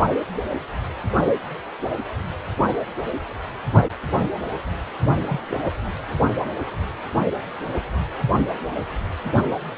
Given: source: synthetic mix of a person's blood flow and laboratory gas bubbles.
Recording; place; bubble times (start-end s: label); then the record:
Doppler ultrasound of blood flow; precordium
5.27-5.40 s: bubbles
5.50-5.64 s: bubbles
From the record:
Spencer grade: 2 (many but less than half of the cardiac periods contain bubble signals, singularly or in groups); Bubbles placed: only in the low amplitude regions of the cardiac cycle